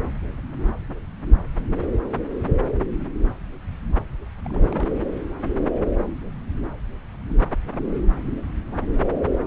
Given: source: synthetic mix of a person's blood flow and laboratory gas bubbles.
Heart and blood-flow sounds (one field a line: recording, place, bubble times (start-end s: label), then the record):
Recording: Doppler ultrasound of blood flow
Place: subclavian vein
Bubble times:
4.45-5.01 s: bubbles
From the record:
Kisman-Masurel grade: 211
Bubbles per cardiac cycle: several, 3 to 8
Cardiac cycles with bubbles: 1 to 10%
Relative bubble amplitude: barely perceptible (0.100 to 0.250)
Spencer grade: 1 (occasional bubble signal discernible with the cardiac motion signal, with majority of cardiac periods free of bubbles)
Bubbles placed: anywhere in the cardiac cycle